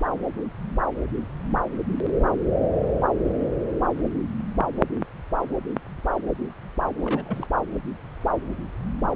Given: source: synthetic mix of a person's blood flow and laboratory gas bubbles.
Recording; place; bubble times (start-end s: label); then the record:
Doppler ultrasound of blood flow; subclavian vein
7.02-7.46 s: bubbles
From the record:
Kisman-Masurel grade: 211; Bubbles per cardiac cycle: several, 3 to 8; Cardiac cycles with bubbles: 1 to 10%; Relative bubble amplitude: barely perceptible (0.100 to 0.250); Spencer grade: 1 (occasional bubble signal discernible with the cardiac motion signal, with majority of cardiac periods free of bubbles); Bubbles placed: anywhere in the cardiac cycle